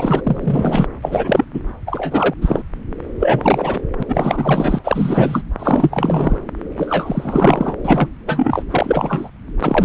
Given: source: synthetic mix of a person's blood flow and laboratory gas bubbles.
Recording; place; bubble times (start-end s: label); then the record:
Doppler ultrasound of blood flow; subclavian vein
0.00-0.21 s: bubbles
0.24-0.86 s: bubbles
1.02-1.45 s: bubbles
1.53-1.61 s: bubbles
1.86-2.34 s: bubbles
2.41-2.62 s: bubbles
3.20-3.82 s: bubbles
3.98-4.03 s: bubbles
4.08-4.79 s: bubbles
4.83-5.42 s: bubbles
5.59-6.38 s: bubbles
6.76-7.77 s: bubbles
7.84-8.08 s: bubbles
8.26-8.63 s: bubbles
8.69-9.29 s: bubbles
9.60-9.85 s: bubbles
From the record:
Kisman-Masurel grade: 343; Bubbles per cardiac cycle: rolling drumbeat, 9 or more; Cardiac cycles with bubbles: 100%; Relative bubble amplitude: loud (0.450 to 0.775); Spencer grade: 3 (all of the cardiac periods contain showers or single bubble signals, but not dominating or overriding the cardiac motion signals); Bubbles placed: anywhere in the cardiac cycle